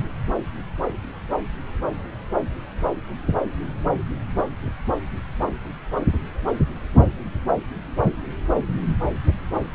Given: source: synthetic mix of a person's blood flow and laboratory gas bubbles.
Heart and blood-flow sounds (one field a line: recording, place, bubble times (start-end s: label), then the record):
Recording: Doppler ultrasound of blood flow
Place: subclavian vein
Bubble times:
no bubbles
From the record:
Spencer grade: 0 (complete lack of bubble signals)